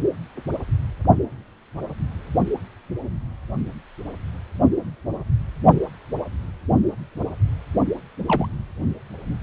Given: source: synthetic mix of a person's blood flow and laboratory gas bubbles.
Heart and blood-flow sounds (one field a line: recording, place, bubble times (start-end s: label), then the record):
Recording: Doppler ultrasound of blood flow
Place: precordium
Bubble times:
8.26-8.48 s: bubbles
From the record:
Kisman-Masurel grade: 221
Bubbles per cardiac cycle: several, 3 to 8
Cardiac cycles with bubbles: 10 to 50%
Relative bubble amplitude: barely perceptible (0.100 to 0.250)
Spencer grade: 2 (many but less than half of the cardiac periods contain bubble signals, singularly or in groups)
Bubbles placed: only in the low amplitude regions of the cardiac cycle